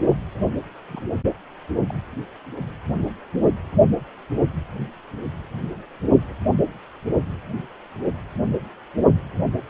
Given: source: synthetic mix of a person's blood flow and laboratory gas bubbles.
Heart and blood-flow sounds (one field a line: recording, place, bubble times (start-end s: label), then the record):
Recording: Doppler ultrasound of blood flow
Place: precordium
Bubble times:
0.08-0.17 s: bubbles
0.89-1.02 s: bubbles
1.86-1.94 s: bubbles
From the record:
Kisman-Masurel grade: 221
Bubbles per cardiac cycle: several, 3 to 8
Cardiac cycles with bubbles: 10 to 50%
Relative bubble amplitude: barely perceptible (0.100 to 0.250)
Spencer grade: 2 (many but less than half of the cardiac periods contain bubble signals, singularly or in groups)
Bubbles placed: anywhere in the cardiac cycle